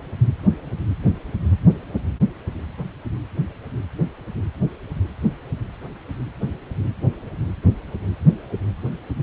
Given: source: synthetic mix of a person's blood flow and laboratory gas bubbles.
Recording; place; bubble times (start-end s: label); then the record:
Doppler ultrasound of blood flow; precordium
no bubbles
From the record:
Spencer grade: 0 (complete lack of bubble signals)